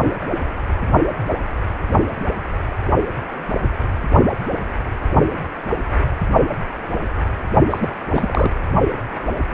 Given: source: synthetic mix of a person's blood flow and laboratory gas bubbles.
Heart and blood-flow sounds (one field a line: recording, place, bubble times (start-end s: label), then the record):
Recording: Doppler ultrasound of blood flow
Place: precordium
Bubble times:
7.70-7.88 s: bubbles
8.12-8.51 s: bubbles
From the record:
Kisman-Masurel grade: 222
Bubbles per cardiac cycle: several, 3 to 8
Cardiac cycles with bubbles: 10 to 50%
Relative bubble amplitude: moderate (0.250 to 0.450)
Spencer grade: 2 (many but less than half of the cardiac periods contain bubble signals, singularly or in groups)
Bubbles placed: only in the low amplitude regions of the cardiac cycle